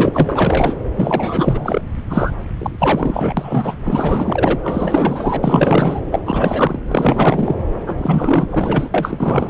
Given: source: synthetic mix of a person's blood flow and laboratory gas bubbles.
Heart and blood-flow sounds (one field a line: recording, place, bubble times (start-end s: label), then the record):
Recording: Doppler ultrasound of blood flow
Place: subclavian vein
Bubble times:
0.00-0.76 s: bubbles
0.96-1.81 s: bubbles
2.09-2.33 s: bubbles
2.58-2.76 s: bubbles
2.79-3.75 s: bubbles
3.85-4.58 s: bubbles
4.63-6.01 s: bubbles
6.11-6.20 s: bubbles
6.25-6.80 s: bubbles
6.88-7.57 s: bubbles
7.87-8.90 s: bubbles
8.94-9.50 s: bubbles
From the record:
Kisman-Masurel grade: 444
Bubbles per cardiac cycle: continuous sound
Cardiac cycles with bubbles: 100%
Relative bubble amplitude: maximal (0.775 to 0.999)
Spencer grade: 4 (maximum detectable bubble signal sounding continuously throughout systole and diastole of every cardiac period, and overriding the amplitude of the normal cardiac signals)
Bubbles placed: anywhere in the cardiac cycle